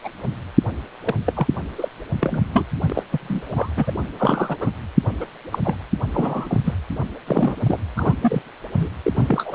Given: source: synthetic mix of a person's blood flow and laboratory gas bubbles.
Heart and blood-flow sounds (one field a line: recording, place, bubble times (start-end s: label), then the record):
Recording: Doppler ultrasound of blood flow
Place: precordium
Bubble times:
0.04-0.09 s: bubbles
1.05-1.15 s: bubbles
1.26-1.47 s: bubbles
1.78-1.89 s: bubbles
2.20-2.42 s: bubbles
2.53-2.65 s: bubbles
2.90-3.03 s: bubbles
3.12-3.70 s: bubbles
3.76-3.92 s: bubbles
4.17-4.56 s: bubbles
4.60-4.72 s: bubbles
5.20-5.26 s: bubbles
5.52-5.58 s: bubbles
5.63-5.75 s: bubbles
6.13-6.58 s: bubbles
6.64-6.74 s: bubbles
7.26-7.55 s: bubbles
7.58-7.78 s: bubbles
7.96-8.14 s: bubbles
8.21-8.43 s: bubbles
8.73-8.89 s: bubbles
9.04-9.12 s: bubbles
9.15-9.55 s: bubbles
From the record:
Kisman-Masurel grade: 242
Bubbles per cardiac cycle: several, 3 to 8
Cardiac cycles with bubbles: 100%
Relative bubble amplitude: moderate (0.250 to 0.450)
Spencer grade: 3 (all of the cardiac periods contain showers or single bubble signals, but not dominating or overriding the cardiac motion signals)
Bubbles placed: anywhere in the cardiac cycle